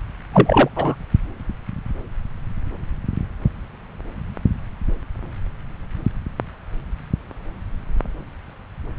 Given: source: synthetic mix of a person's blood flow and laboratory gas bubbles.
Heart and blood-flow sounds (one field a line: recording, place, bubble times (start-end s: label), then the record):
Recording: Doppler ultrasound of blood flow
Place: subclavian vein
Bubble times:
0.33-0.69 s: bubbles
0.76-0.97 s: bubbles
From the record:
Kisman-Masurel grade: 213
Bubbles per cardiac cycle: several, 3 to 8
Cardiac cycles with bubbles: 1 to 10%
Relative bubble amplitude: loud (0.450 to 0.775)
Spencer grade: 1 (occasional bubble signal discernible with the cardiac motion signal, with majority of cardiac periods free of bubbles)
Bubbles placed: anywhere in the cardiac cycle